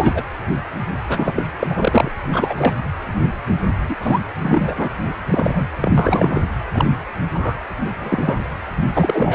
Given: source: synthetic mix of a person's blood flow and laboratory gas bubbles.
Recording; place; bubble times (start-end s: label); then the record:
Doppler ultrasound of blood flow; precordium
0.00-0.24 s: bubbles
1.08-1.43 s: bubbles
1.60-1.67 s: bubbles
1.70-2.10 s: bubbles
2.33-2.73 s: bubbles
3.89-3.96 s: bubbles
4.00-4.20 s: bubbles
4.42-4.75 s: bubbles
4.77-4.90 s: bubbles
5.29-5.68 s: bubbles
5.80-5.92 s: bubbles
5.97-6.40 s: bubbles
6.73-6.85 s: bubbles
7.33-7.56 s: bubbles
8.00-8.43 s: bubbles
8.93-9.35 s: bubbles
From the record:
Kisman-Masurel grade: 233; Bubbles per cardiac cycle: several, 3 to 8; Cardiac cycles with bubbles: 50 to 99%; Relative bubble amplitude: loud (0.450 to 0.775); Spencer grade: 3 (all of the cardiac periods contain showers or single bubble signals, but not dominating or overriding the cardiac motion signals); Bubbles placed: anywhere in the cardiac cycle